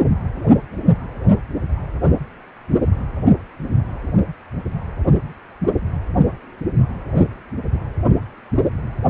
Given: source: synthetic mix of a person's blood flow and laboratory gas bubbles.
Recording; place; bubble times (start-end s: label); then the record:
Doppler ultrasound of blood flow; precordium
no bubbles
From the record:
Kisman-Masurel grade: 000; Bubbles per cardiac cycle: 0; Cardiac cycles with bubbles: 0%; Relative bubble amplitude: no bubbles discernible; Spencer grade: 0 (complete lack of bubble signals)